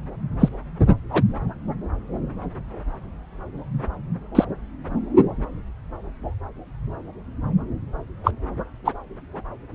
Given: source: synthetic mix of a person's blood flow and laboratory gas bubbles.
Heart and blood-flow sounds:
Doppler ultrasound of blood flow; subclavian vein
0.39-0.48 s: bubbles
1.12-1.24 s: bubbles
4.34-4.45 s: bubbles
8.24-8.31 s: bubbles
8.85-8.92 s: bubbles
From the record:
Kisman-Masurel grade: 123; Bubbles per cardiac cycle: 1 to 2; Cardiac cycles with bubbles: 10 to 50%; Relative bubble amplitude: loud (0.450 to 0.775); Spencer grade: 2 (many but less than half of the cardiac periods contain bubble signals, singularly or in groups); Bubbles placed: anywhere in the cardiac cycle

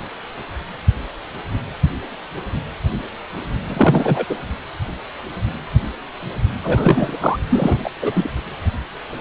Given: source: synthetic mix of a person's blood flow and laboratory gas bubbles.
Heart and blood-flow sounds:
Doppler ultrasound of blood flow; precordium
3.67-4.26 s: bubbles
4.29-4.37 s: bubbles
6.63-7.17 s: bubbles
7.21-7.38 s: bubbles
7.49-7.89 s: bubbles
8.02-8.30 s: bubbles
From the record:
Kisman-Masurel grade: 223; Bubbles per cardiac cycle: several, 3 to 8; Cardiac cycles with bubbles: 10 to 50%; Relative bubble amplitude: loud (0.450 to 0.775); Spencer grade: 2 (many but less than half of the cardiac periods contain bubble signals, singularly or in groups); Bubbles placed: anywhere in the cardiac cycle

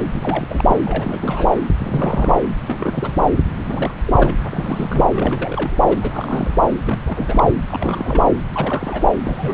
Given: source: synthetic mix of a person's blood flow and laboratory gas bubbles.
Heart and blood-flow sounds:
Doppler ultrasound of blood flow; subclavian vein
0.12-0.65 s: bubbles
0.68-0.75 s: bubbles
0.85-1.51 s: bubbles
1.78-2.39 s: bubbles
2.67-3.17 s: bubbles
3.55-3.94 s: bubbles
4.05-4.37 s: bubbles
4.44-5.06 s: bubbles
5.13-5.77 s: bubbles
5.88-5.97 s: bubbles
6.01-6.54 s: bubbles
6.85-6.99 s: bubbles
7.06-7.51 s: bubbles
7.67-8.28 s: bubbles
8.53-9.08 s: bubbles
9.24-9.54 s: bubbles
From the record:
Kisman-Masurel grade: 342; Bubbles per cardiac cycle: rolling drumbeat, 9 or more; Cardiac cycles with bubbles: 100%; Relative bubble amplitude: moderate (0.250 to 0.450); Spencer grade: 3 (all of the cardiac periods contain showers or single bubble signals, but not dominating or overriding the cardiac motion signals); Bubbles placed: anywhere in the cardiac cycle

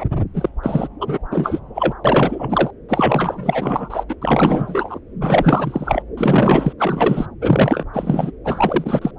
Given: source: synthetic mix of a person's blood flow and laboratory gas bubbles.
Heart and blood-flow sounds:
Doppler ultrasound of blood flow; subclavian vein
0.00-0.04 s: bubbles
0.34-0.49 s: bubbles
0.62-0.88 s: bubbles
1.01-1.18 s: bubbles
1.30-1.60 s: bubbles
1.75-1.94 s: bubbles
2.04-2.71 s: bubbles
2.89-4.04 s: bubbles
4.08-4.16 s: bubbles
4.21-4.99 s: bubbles
5.21-6.03 s: bubbles
6.17-6.73 s: bubbles
6.79-7.26 s: bubbles
7.41-7.84 s: bubbles
7.93-8.31 s: bubbles
8.44-9.11 s: bubbles
From the record:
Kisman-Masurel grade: 444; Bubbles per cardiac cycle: continuous sound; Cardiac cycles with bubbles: 100%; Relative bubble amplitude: maximal (0.775 to 0.999); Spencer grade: 4 (maximum detectable bubble signal sounding continuously throughout systole and diastole of every cardiac period, and overriding the amplitude of the normal cardiac signals); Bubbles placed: anywhere in the cardiac cycle

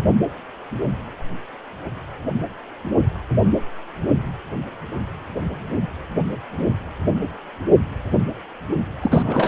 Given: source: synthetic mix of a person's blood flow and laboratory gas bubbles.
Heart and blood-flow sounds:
Doppler ultrasound of blood flow; precordium
9.03-9.48 s: bubbles
From the record:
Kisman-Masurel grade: 213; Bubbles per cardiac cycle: several, 3 to 8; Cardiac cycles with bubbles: 1 to 10%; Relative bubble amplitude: loud (0.450 to 0.775); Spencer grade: 1 (occasional bubble signal discernible with the cardiac motion signal, with majority of cardiac periods free of bubbles); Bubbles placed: only in the low amplitude regions of the cardiac cycle

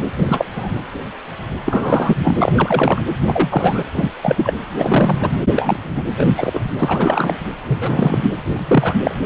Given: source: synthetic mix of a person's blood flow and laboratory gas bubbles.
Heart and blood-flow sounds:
Doppler ultrasound of blood flow; precordium
0.15-0.45 s: bubbles
0.55-0.69 s: bubbles
1.66-2.35 s: bubbles
2.38-3.02 s: bubbles
3.27-3.83 s: bubbles
3.93-4.10 s: bubbles
4.22-4.54 s: bubbles
4.78-5.31 s: bubbles
5.51-5.79 s: bubbles
5.83-6.03 s: bubbles
6.17-6.29 s: bubbles
6.37-6.62 s: bubbles
6.79-7.35 s: bubbles
7.67-8.18 s: bubbles
8.52-8.94 s: bubbles
9.01-9.15 s: bubbles
From the record:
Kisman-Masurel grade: 233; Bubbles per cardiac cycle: several, 3 to 8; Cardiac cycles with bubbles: 50 to 99%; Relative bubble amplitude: loud (0.450 to 0.775); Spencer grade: 3 (all of the cardiac periods contain showers or single bubble signals, but not dominating or overriding the cardiac motion signals); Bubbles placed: anywhere in the cardiac cycle

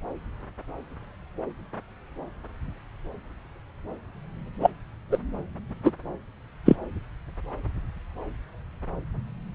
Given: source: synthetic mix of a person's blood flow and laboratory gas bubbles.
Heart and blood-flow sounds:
Doppler ultrasound of blood flow; subclavian vein
4.60-4.71 s: bubbles
5.11-5.17 s: bubbles
5.84-5.91 s: bubbles
6.66-6.76 s: bubbles
From the record:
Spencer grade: 2 (many but less than half of the cardiac periods contain bubble signals, singularly or in groups); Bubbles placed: anywhere in the cardiac cycle

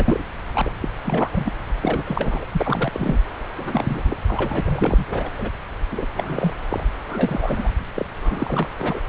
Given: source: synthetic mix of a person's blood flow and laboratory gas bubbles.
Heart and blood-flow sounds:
Doppler ultrasound of blood flow; subclavian vein
0.00-0.23 s: bubbles
0.55-0.72 s: bubbles
0.82-0.89 s: bubbles
1.05-1.29 s: bubbles
1.31-1.52 s: bubbles
1.81-2.45 s: bubbles
2.52-2.91 s: bubbles
2.94-3.18 s: bubbles
3.57-4.17 s: bubbles
4.26-4.61 s: bubbles
4.65-5.06 s: bubbles
5.08-5.30 s: bubbles
5.38-5.50 s: bubbles
5.91-6.06 s: bubbles
6.14-6.53 s: bubbles
6.71-6.84 s: bubbles
7.08-7.73 s: bubbles
7.95-8.05 s: bubbles
8.18-8.68 s: bubbles
8.78-8.99 s: bubbles
From the record:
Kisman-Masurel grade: 342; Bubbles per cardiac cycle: rolling drumbeat, 9 or more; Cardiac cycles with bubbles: 100%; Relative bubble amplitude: moderate (0.250 to 0.450); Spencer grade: 3 (all of the cardiac periods contain showers or single bubble signals, but not dominating or overriding the cardiac motion signals); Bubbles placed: anywhere in the cardiac cycle

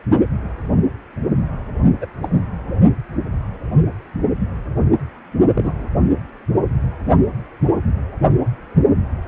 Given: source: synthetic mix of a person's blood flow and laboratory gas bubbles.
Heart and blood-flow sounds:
Doppler ultrasound of blood flow; precordium
2.01-2.07 s: bubbles
2.22-2.29 s: bubbles
5.54-5.87 s: bubbles
From the record:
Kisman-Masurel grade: 122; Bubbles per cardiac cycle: 1 to 2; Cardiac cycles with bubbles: 10 to 50%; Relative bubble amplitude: moderate (0.250 to 0.450); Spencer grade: 2 (many but less than half of the cardiac periods contain bubble signals, singularly or in groups); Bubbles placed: only in the low amplitude regions of the cardiac cycle

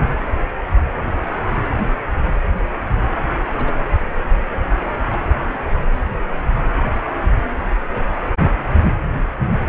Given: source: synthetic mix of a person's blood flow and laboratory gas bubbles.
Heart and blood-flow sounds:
Doppler ultrasound of blood flow; precordium
3.54-3.75 s: bubbles
From the record:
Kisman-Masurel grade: 111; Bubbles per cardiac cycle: 1 to 2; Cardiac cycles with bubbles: 1 to 10%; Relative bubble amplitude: barely perceptible (0.100 to 0.250); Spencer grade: 1 (occasional bubble signal discernible with the cardiac motion signal, with majority of cardiac periods free of bubbles); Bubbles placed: anywhere in the cardiac cycle

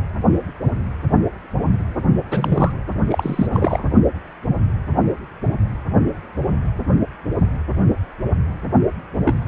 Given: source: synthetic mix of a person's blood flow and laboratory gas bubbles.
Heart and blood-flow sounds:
Doppler ultrasound of blood flow; precordium
2.31-2.72 s: bubbles
3.10-3.47 s: bubbles
3.52-3.84 s: bubbles
9.11-9.20 s: bubbles
9.24-9.41 s: bubbles
From the record:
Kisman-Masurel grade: 222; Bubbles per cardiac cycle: several, 3 to 8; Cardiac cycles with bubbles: 10 to 50%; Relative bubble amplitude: moderate (0.250 to 0.450); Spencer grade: 2 (many but less than half of the cardiac periods contain bubble signals, singularly or in groups); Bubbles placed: only in the low amplitude regions of the cardiac cycle

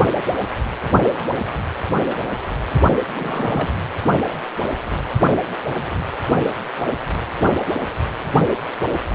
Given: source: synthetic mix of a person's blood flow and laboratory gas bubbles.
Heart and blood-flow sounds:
Doppler ultrasound of blood flow; precordium
2.67-2.84 s: bubbles
3.15-3.70 s: bubbles
From the record:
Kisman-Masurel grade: 221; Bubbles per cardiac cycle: several, 3 to 8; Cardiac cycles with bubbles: 10 to 50%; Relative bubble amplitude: barely perceptible (0.100 to 0.250); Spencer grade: 2 (many but less than half of the cardiac periods contain bubble signals, singularly or in groups); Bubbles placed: anywhere in the cardiac cycle

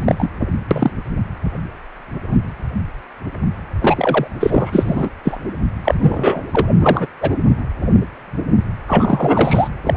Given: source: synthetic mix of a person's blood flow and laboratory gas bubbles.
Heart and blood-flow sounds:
Doppler ultrasound of blood flow; precordium
0.00-0.30 s: bubbles
0.70-0.91 s: bubbles
3.81-4.28 s: bubbles
4.40-5.11 s: bubbles
5.24-5.37 s: bubbles
5.84-5.95 s: bubbles
6.01-6.42 s: bubbles
6.52-6.68 s: bubbles
6.80-7.07 s: bubbles
7.21-7.33 s: bubbles
8.88-9.70 s: bubbles
9.84-9.97 s: bubbles
From the record:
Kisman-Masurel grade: 233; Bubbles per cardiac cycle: several, 3 to 8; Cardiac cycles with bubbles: 50 to 99%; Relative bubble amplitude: loud (0.450 to 0.775); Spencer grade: 3 (all of the cardiac periods contain showers or single bubble signals, but not dominating or overriding the cardiac motion signals); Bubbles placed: anywhere in the cardiac cycle

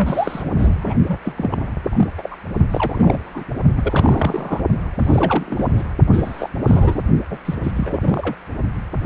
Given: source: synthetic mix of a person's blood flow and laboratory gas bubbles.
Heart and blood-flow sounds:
Doppler ultrasound of blood flow; precordium
0.00-0.50 s: bubbles
0.58-0.95 s: bubbles
1.07-1.19 s: bubbles
1.25-1.56 s: bubbles
1.59-1.73 s: bubbles
1.83-2.08 s: bubbles
2.18-2.36 s: bubbles
2.71-3.45 s: bubbles
3.75-4.60 s: bubbles
4.99-5.72 s: bubbles
5.76-5.84 s: bubbles
6.12-6.49 s: bubbles
6.66-7.03 s: bubbles
7.30-7.38 s: bubbles
7.45-7.55 s: bubbles
7.63-7.71 s: bubbles
7.76-8.36 s: bubbles
From the record:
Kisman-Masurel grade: 342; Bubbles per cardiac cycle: rolling drumbeat, 9 or more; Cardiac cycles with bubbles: 100%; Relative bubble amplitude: moderate (0.250 to 0.450); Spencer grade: 3 (all of the cardiac periods contain showers or single bubble signals, but not dominating or overriding the cardiac motion signals); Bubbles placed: only in the low amplitude regions of the cardiac cycle

